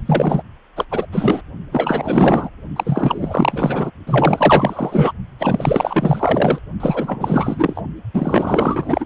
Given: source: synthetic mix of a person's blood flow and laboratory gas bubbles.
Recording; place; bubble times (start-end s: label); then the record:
Doppler ultrasound of blood flow; precordium
0.05-0.42 s: bubbles
0.76-0.85 s: bubbles
0.91-1.06 s: bubbles
1.12-1.42 s: bubbles
1.71-2.50 s: bubbles
2.76-3.91 s: bubbles
4.07-5.13 s: bubbles
5.39-6.58 s: bubbles
6.80-7.82 s: bubbles
8.13-9.05 s: bubbles
From the record:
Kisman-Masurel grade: 444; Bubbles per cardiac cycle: continuous sound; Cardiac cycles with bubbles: 100%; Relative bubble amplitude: maximal (0.775 to 0.999); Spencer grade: 4 (maximum detectable bubble signal sounding continuously throughout systole and diastole of every cardiac period, and overriding the amplitude of the normal cardiac signals); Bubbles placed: only in the low amplitude regions of the cardiac cycle